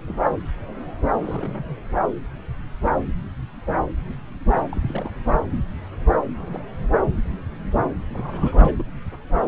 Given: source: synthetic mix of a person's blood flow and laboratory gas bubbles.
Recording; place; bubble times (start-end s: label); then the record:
Doppler ultrasound of blood flow; subclavian vein
0.06-0.18 s: bubbles
1.17-1.77 s: bubbles
4.52-5.13 s: bubbles
6.34-6.63 s: bubbles
6.91-6.96 s: bubbles
8.12-8.84 s: bubbles
From the record:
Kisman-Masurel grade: 221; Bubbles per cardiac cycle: several, 3 to 8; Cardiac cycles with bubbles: 10 to 50%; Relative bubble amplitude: barely perceptible (0.100 to 0.250); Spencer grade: 2 (many but less than half of the cardiac periods contain bubble signals, singularly or in groups); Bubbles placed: anywhere in the cardiac cycle